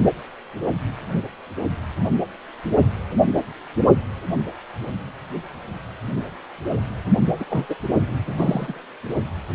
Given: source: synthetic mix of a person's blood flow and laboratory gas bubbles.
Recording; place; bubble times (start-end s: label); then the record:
Doppler ultrasound of blood flow; precordium
7.40-7.45 s: bubbles
7.50-7.66 s: bubbles
7.69-7.75 s: bubbles
8.26-8.81 s: bubbles
From the record:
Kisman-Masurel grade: 212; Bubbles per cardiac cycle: several, 3 to 8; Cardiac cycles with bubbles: 1 to 10%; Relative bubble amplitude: moderate (0.250 to 0.450); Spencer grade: 1 (occasional bubble signal discernible with the cardiac motion signal, with majority of cardiac periods free of bubbles); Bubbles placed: only in the low amplitude regions of the cardiac cycle